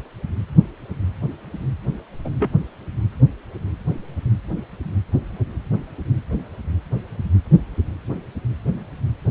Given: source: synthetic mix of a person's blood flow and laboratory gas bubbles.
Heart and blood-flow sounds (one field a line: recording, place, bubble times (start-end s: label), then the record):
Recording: Doppler ultrasound of blood flow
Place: precordium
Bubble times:
2.25-2.29 s: bubbles
2.40-2.50 s: bubbles
From the record:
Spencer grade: 2 (many but less than half of the cardiac periods contain bubble signals, singularly or in groups)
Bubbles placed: anywhere in the cardiac cycle